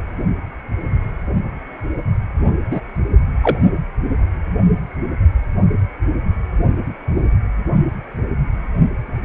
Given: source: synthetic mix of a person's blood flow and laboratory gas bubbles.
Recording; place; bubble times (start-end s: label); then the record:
Doppler ultrasound of blood flow; precordium
2.71-2.80 s: bubbles
3.42-3.58 s: bubbles
From the record:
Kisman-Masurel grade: 123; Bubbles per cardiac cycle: 1 to 2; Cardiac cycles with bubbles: 10 to 50%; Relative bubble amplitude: loud (0.450 to 0.775); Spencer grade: 2 (many but less than half of the cardiac periods contain bubble signals, singularly or in groups); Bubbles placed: only in the low amplitude regions of the cardiac cycle